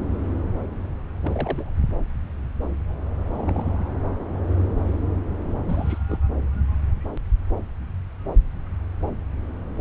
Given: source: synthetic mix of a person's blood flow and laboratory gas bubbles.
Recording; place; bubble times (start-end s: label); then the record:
Doppler ultrasound of blood flow; subclavian vein
1.22-1.70 s: bubbles
3.33-3.77 s: bubbles
3.79-3.88 s: bubbles
5.67-6.03 s: bubbles
6.08-6.19 s: bubbles
From the record:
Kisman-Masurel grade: 221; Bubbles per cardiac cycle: several, 3 to 8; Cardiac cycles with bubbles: 10 to 50%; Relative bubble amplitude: barely perceptible (0.100 to 0.250); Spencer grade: 2 (many but less than half of the cardiac periods contain bubble signals, singularly or in groups); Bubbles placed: anywhere in the cardiac cycle